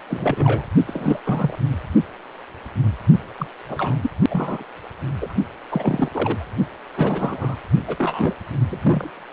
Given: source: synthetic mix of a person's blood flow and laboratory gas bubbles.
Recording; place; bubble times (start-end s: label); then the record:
Doppler ultrasound of blood flow; precordium
0.10-0.66 s: bubbles
0.86-1.20 s: bubbles
1.25-1.59 s: bubbles
3.38-3.47 s: bubbles
3.68-3.97 s: bubbles
4.02-4.10 s: bubbles
4.30-4.63 s: bubbles
5.20-5.34 s: bubbles
5.70-6.08 s: bubbles
6.13-6.48 s: bubbles
6.96-7.55 s: bubbles
7.88-8.33 s: bubbles
8.66-9.11 s: bubbles
From the record:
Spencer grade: 3 (all of the cardiac periods contain showers or single bubble signals, but not dominating or overriding the cardiac motion signals); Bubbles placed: only in the low amplitude regions of the cardiac cycle